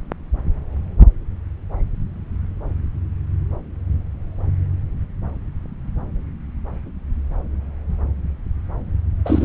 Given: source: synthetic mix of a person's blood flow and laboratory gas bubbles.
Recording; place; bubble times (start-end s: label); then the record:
Doppler ultrasound of blood flow; subclavian vein
9.25-9.45 s: bubbles
From the record:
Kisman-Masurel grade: 213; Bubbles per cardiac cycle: several, 3 to 8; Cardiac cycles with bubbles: 1 to 10%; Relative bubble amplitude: loud (0.450 to 0.775); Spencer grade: 1 (occasional bubble signal discernible with the cardiac motion signal, with majority of cardiac periods free of bubbles); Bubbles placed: anywhere in the cardiac cycle